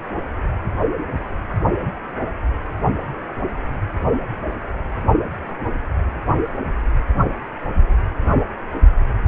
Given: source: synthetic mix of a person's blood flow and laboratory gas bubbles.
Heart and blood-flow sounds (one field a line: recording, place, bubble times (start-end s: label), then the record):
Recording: Doppler ultrasound of blood flow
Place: precordium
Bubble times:
no bubbles
From the record:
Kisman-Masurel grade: 000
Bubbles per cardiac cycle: 0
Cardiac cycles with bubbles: 0%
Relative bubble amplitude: no bubbles discernible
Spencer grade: 0 (complete lack of bubble signals)